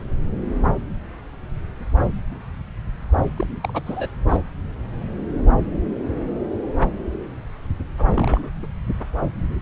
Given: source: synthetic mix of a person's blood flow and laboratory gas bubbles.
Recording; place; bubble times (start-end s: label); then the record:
Doppler ultrasound of blood flow; subclavian vein
3.36-3.46 s: bubbles
3.62-3.82 s: bubbles
3.85-4.10 s: bubbles
4.29-4.37 s: bubbles
7.98-8.06 s: bubbles
8.12-8.50 s: bubbles
8.62-8.67 s: bubbles
From the record:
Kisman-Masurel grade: 221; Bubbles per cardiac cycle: several, 3 to 8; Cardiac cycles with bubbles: 10 to 50%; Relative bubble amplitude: barely perceptible (0.100 to 0.250); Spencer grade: 2 (many but less than half of the cardiac periods contain bubble signals, singularly or in groups); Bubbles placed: anywhere in the cardiac cycle